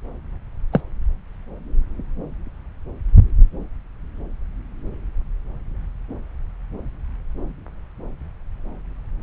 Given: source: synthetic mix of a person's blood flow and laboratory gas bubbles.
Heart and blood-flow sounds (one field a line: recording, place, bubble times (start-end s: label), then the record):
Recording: Doppler ultrasound of blood flow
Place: subclavian vein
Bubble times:
0.72-0.81 s: bubbles
From the record:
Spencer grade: 1 (occasional bubble signal discernible with the cardiac motion signal, with majority of cardiac periods free of bubbles)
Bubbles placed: anywhere in the cardiac cycle